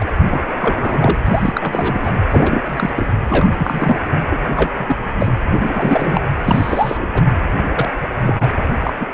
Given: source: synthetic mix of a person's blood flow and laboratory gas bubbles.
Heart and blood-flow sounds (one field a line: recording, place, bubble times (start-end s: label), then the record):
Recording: Doppler ultrasound of blood flow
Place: precordium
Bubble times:
0.00-0.09 s: bubbles
0.26-0.40 s: bubbles
0.59-1.18 s: bubbles
1.25-2.17 s: bubbles
2.28-2.62 s: bubbles
2.66-2.91 s: bubbles
2.96-3.12 s: bubbles
3.23-3.51 s: bubbles
3.58-3.98 s: bubbles
4.30-4.38 s: bubbles
4.54-4.71 s: bubbles
4.79-4.96 s: bubbles
5.19-5.35 s: bubbles
5.55-6.21 s: bubbles
6.39-7.08 s: bubbles
7.13-7.22 s: bubbles
7.74-7.89 s: bubbles
8.18-8.53 s: bubbles
8.84-8.94 s: bubbles
8.99-9.06 s: bubbles
9.12-9.14 s: bubbles
From the record:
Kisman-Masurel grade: 243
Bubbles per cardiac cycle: several, 3 to 8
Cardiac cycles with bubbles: 100%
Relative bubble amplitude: loud (0.450 to 0.775)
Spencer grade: 3 (all of the cardiac periods contain showers or single bubble signals, but not dominating or overriding the cardiac motion signals)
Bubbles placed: anywhere in the cardiac cycle